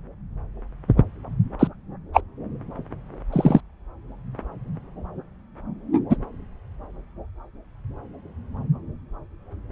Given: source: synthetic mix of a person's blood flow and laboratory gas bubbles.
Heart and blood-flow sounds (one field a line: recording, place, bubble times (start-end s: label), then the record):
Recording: Doppler ultrasound of blood flow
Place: subclavian vein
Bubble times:
1.59-1.68 s: bubbles
2.14-2.21 s: bubbles
3.32-3.60 s: bubbles
6.09-6.17 s: bubbles
From the record:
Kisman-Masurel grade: 123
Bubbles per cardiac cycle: 1 to 2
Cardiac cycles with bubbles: 10 to 50%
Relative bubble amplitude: loud (0.450 to 0.775)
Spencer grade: 2 (many but less than half of the cardiac periods contain bubble signals, singularly or in groups)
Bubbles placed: anywhere in the cardiac cycle